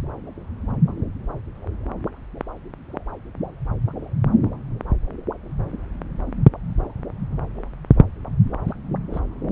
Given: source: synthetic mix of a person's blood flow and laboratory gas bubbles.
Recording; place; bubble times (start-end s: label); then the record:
Doppler ultrasound of blood flow; subclavian vein
8.68-8.74 s: bubbles
9.12-9.21 s: bubbles
From the record:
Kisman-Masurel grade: 111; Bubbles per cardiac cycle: 1 to 2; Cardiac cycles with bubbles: 1 to 10%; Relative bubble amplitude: barely perceptible (0.100 to 0.250); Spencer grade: 1 (occasional bubble signal discernible with the cardiac motion signal, with majority of cardiac periods free of bubbles); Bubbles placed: anywhere in the cardiac cycle